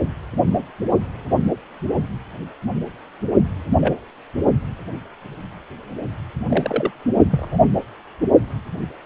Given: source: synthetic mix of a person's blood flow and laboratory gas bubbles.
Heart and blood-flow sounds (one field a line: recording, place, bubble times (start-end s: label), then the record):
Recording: Doppler ultrasound of blood flow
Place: precordium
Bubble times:
3.77-4.01 s: bubbles
6.49-6.91 s: bubbles
7.30-7.48 s: bubbles
7.51-7.58 s: bubbles
8.80-8.88 s: bubbles
From the record:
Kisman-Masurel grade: 122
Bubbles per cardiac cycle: 1 to 2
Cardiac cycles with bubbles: 10 to 50%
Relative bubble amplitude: moderate (0.250 to 0.450)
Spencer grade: 2 (many but less than half of the cardiac periods contain bubble signals, singularly or in groups)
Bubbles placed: only in the low amplitude regions of the cardiac cycle